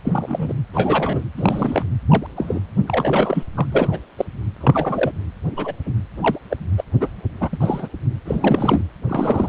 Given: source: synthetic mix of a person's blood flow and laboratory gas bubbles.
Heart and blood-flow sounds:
Doppler ultrasound of blood flow; precordium
0.03-0.53 s: bubbles
0.73-1.22 s: bubbles
1.37-1.84 s: bubbles
2.08-2.27 s: bubbles
2.35-2.60 s: bubbles
2.88-3.44 s: bubbles
3.56-3.67 s: bubbles
3.70-3.99 s: bubbles
4.18-4.25 s: bubbles
4.61-5.12 s: bubbles
5.57-5.72 s: bubbles
5.86-5.92 s: bubbles
6.22-6.38 s: bubbles
6.50-6.57 s: bubbles
6.77-6.83 s: bubbles
7.00-7.08 s: bubbles
7.41-7.49 s: bubbles
7.52-7.58 s: bubbles
7.60-7.88 s: bubbles
8.25-8.81 s: bubbles
9.07-9.49 s: bubbles
From the record:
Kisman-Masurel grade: 242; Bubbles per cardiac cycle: several, 3 to 8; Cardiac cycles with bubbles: 100%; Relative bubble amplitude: moderate (0.250 to 0.450); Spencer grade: 3 (all of the cardiac periods contain showers or single bubble signals, but not dominating or overriding the cardiac motion signals); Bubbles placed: anywhere in the cardiac cycle

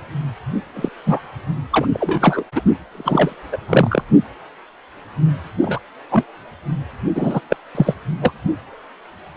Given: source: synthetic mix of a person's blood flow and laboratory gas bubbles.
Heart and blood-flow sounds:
Doppler ultrasound of blood flow; precordium
0.75-0.89 s: bubbles
1.06-1.21 s: bubbles
1.72-1.86 s: bubbles
1.93-2.43 s: bubbles
2.55-2.62 s: bubbles
2.92-3.36 s: bubbles
3.52-3.58 s: bubbles
3.67-4.04 s: bubbles
5.61-5.79 s: bubbles
6.09-6.26 s: bubbles
7.14-7.41 s: bubbles
7.50-7.56 s: bubbles
7.75-7.94 s: bubbles
8.21-8.33 s: bubbles
From the record:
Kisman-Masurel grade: 233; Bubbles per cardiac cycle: several, 3 to 8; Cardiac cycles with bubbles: 50 to 99%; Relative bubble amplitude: loud (0.450 to 0.775); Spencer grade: 3 (all of the cardiac periods contain showers or single bubble signals, but not dominating or overriding the cardiac motion signals); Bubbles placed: only in the low amplitude regions of the cardiac cycle

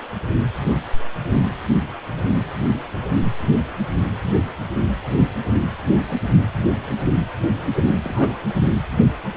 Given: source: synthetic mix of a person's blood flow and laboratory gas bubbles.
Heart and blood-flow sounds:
Doppler ultrasound of blood flow; precordium
8.04-8.35 s: bubbles
From the record:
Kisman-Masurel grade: 112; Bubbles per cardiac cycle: 1 to 2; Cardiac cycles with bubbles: 1 to 10%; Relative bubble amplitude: moderate (0.250 to 0.450); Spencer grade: 1 (occasional bubble signal discernible with the cardiac motion signal, with majority of cardiac periods free of bubbles); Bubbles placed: anywhere in the cardiac cycle

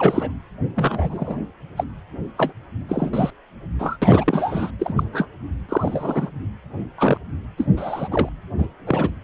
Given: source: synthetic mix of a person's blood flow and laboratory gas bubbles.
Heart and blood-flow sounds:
Doppler ultrasound of blood flow; precordium
0.00-0.32 s: bubbles
0.75-1.36 s: bubbles
1.77-1.84 s: bubbles
2.37-2.53 s: bubbles
2.89-3.10 s: bubbles
3.13-3.31 s: bubbles
3.79-3.97 s: bubbles
4.02-4.71 s: bubbles
4.79-5.04 s: bubbles
5.12-5.28 s: bubbles
5.69-6.29 s: bubbles
6.98-7.17 s: bubbles
7.57-7.68 s: bubbles
7.77-8.29 s: bubbles
8.58-8.67 s: bubbles
8.86-9.10 s: bubbles
From the record:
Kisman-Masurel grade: 243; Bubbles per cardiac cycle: several, 3 to 8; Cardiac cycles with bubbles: 100%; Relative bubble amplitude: loud (0.450 to 0.775); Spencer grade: 3 (all of the cardiac periods contain showers or single bubble signals, but not dominating or overriding the cardiac motion signals); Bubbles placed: anywhere in the cardiac cycle

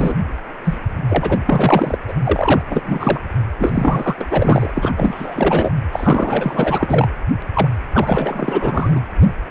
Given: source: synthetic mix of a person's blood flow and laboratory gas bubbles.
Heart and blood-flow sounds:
Doppler ultrasound of blood flow; precordium
0.00-0.15 s: bubbles
0.64-0.79 s: bubbles
1.08-1.98 s: bubbles
2.08-2.14 s: bubbles
2.24-2.62 s: bubbles
2.70-3.20 s: bubbles
3.60-4.92 s: bubbles
4.96-5.74 s: bubbles
5.92-7.08 s: bubbles
7.54-7.68 s: bubbles
7.94-9.01 s: bubbles
From the record:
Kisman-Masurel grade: 444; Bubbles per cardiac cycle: continuous sound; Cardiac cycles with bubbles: 100%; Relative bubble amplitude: maximal (0.775 to 0.999); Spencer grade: 4 (maximum detectable bubble signal sounding continuously throughout systole and diastole of every cardiac period, and overriding the amplitude of the normal cardiac signals); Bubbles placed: anywhere in the cardiac cycle

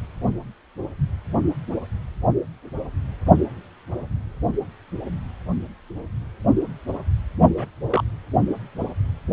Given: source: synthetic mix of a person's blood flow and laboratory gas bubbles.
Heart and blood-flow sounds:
Doppler ultrasound of blood flow; precordium
7.57-7.67 s: bubbles
7.91-8.04 s: bubbles
From the record:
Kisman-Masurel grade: 111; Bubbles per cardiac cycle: 1 to 2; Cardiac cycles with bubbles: 1 to 10%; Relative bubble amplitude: barely perceptible (0.100 to 0.250); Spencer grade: 1 (occasional bubble signal discernible with the cardiac motion signal, with majority of cardiac periods free of bubbles); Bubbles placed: only in the low amplitude regions of the cardiac cycle

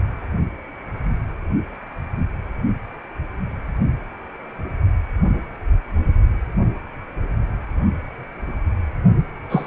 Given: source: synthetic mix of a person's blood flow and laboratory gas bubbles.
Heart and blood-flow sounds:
Doppler ultrasound of blood flow; precordium
9.49-9.67 s: bubbles
From the record:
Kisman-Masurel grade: 113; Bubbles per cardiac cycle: 1 to 2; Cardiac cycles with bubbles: 1 to 10%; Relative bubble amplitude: loud (0.450 to 0.775); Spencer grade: 1 (occasional bubble signal discernible with the cardiac motion signal, with majority of cardiac periods free of bubbles); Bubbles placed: only in the low amplitude regions of the cardiac cycle

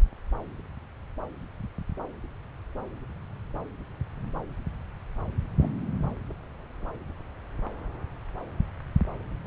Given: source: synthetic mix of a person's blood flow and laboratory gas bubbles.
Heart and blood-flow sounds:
Doppler ultrasound of blood flow; subclavian vein
5.60-5.72 s: bubbles
From the record:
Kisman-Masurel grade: 112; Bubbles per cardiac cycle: 1 to 2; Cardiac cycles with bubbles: 1 to 10%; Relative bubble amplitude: moderate (0.250 to 0.450); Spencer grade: 1 (occasional bubble signal discernible with the cardiac motion signal, with majority of cardiac periods free of bubbles); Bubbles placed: anywhere in the cardiac cycle

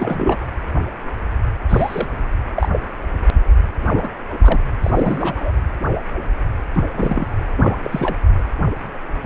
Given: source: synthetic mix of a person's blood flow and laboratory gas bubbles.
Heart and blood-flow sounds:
Doppler ultrasound of blood flow; precordium
0.00-0.40 s: bubbles
1.69-2.08 s: bubbles
2.56-2.69 s: bubbles
2.72-2.80 s: bubbles
3.93-4.10 s: bubbles
4.42-4.59 s: bubbles
4.82-5.51 s: bubbles
6.73-6.88 s: bubbles
6.93-7.47 s: bubbles
7.56-7.77 s: bubbles
7.84-8.15 s: bubbles
From the record:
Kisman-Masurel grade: 232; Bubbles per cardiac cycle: several, 3 to 8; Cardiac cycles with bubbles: 50 to 99%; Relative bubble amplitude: moderate (0.250 to 0.450); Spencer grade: 3 (all of the cardiac periods contain showers or single bubble signals, but not dominating or overriding the cardiac motion signals); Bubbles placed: anywhere in the cardiac cycle

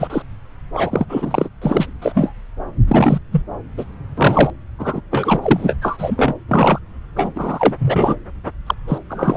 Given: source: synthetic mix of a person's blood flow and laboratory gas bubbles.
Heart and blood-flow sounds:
Doppler ultrasound of blood flow; subclavian vein
0.00-0.23 s: bubbles
0.73-1.06 s: bubbles
1.09-1.49 s: bubbles
1.61-1.87 s: bubbles
2.02-2.33 s: bubbles
2.88-3.19 s: bubbles
3.31-3.42 s: bubbles
3.77-3.85 s: bubbles
4.17-4.50 s: bubbles
4.79-5.01 s: bubbles
5.11-5.76 s: bubbles
5.81-6.34 s: bubbles
6.48-6.79 s: bubbles
7.16-7.75 s: bubbles
7.78-8.15 s: bubbles
8.66-8.74 s: bubbles
8.87-8.98 s: bubbles
9.09-9.36 s: bubbles
From the record:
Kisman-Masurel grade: 343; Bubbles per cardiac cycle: rolling drumbeat, 9 or more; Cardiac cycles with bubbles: 100%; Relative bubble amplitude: loud (0.450 to 0.775); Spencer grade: 3 (all of the cardiac periods contain showers or single bubble signals, but not dominating or overriding the cardiac motion signals); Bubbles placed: anywhere in the cardiac cycle

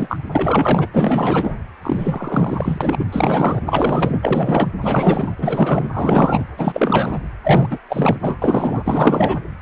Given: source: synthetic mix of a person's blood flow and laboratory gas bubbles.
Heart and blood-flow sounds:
Doppler ultrasound of blood flow; precordium
0.00-0.19 s: bubbles
0.32-0.88 s: bubbles
0.93-1.55 s: bubbles
1.81-3.05 s: bubbles
3.12-3.62 s: bubbles
3.66-4.69 s: bubbles
4.81-5.35 s: bubbles
5.39-5.88 s: bubbles
5.93-6.44 s: bubbles
6.57-7.19 s: bubbles
7.44-7.79 s: bubbles
7.89-8.37 s: bubbles
8.42-9.38 s: bubbles
From the record:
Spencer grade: 4 (maximum detectable bubble signal sounding continuously throughout systole and diastole of every cardiac period, and overriding the amplitude of the normal cardiac signals); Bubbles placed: anywhere in the cardiac cycle

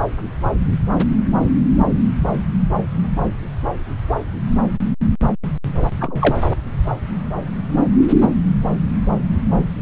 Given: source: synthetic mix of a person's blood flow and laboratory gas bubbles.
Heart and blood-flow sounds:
Doppler ultrasound of blood flow; subclavian vein
6.00-6.36 s: bubbles
From the record:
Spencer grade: 1 (occasional bubble signal discernible with the cardiac motion signal, with majority of cardiac periods free of bubbles); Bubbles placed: anywhere in the cardiac cycle

